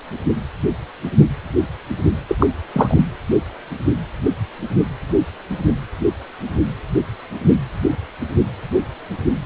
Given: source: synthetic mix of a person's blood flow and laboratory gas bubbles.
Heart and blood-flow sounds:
Doppler ultrasound of blood flow; precordium
2.28-2.35 s: bubbles
2.38-2.46 s: bubbles
2.73-3.04 s: bubbles
From the record:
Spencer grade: 1 (occasional bubble signal discernible with the cardiac motion signal, with majority of cardiac periods free of bubbles); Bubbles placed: anywhere in the cardiac cycle

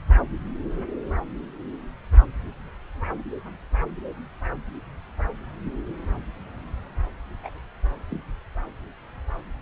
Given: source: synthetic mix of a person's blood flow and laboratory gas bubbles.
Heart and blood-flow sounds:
Doppler ultrasound of blood flow; subclavian vein
7.43-7.49 s: bubbles
8.10-8.22 s: bubbles
From the record:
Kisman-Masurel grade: 111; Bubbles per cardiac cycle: 1 to 2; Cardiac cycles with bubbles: 1 to 10%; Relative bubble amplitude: barely perceptible (0.100 to 0.250); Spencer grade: 1 (occasional bubble signal discernible with the cardiac motion signal, with majority of cardiac periods free of bubbles); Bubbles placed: anywhere in the cardiac cycle

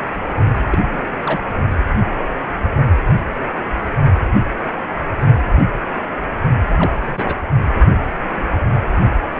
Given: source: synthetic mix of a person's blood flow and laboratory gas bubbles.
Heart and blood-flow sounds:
Doppler ultrasound of blood flow; precordium
0.70-0.78 s: bubbles
0.93-1.02 s: bubbles
1.26-1.41 s: bubbles
6.77-6.92 s: bubbles
7.06-7.36 s: bubbles
From the record:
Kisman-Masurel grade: 222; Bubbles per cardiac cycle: several, 3 to 8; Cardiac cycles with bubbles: 10 to 50%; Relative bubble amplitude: moderate (0.250 to 0.450); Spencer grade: 2 (many but less than half of the cardiac periods contain bubble signals, singularly or in groups); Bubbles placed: only in the low amplitude regions of the cardiac cycle

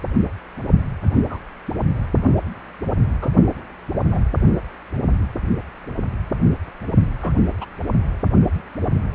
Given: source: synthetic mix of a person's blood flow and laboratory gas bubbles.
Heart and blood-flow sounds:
Doppler ultrasound of blood flow; precordium
1.30-1.38 s: bubbles
3.21-3.29 s: bubbles
4.11-4.23 s: bubbles
7.21-7.32 s: bubbles
7.60-7.66 s: bubbles
8.54-8.61 s: bubbles
From the record:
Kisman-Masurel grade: 122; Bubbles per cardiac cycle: 1 to 2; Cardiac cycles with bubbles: 10 to 50%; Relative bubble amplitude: moderate (0.250 to 0.450); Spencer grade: 2 (many but less than half of the cardiac periods contain bubble signals, singularly or in groups); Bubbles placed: only in the low amplitude regions of the cardiac cycle

